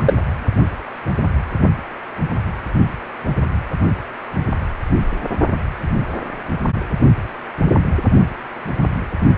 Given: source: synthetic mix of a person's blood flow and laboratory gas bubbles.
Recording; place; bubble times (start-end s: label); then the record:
Doppler ultrasound of blood flow; precordium
0.00-0.02 s: bubbles
0.05-0.14 s: bubbles
From the record:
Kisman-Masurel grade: 213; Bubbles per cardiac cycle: several, 3 to 8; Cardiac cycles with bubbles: 1 to 10%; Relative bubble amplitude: loud (0.450 to 0.775); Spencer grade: 1 (occasional bubble signal discernible with the cardiac motion signal, with majority of cardiac periods free of bubbles); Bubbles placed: only in the low amplitude regions of the cardiac cycle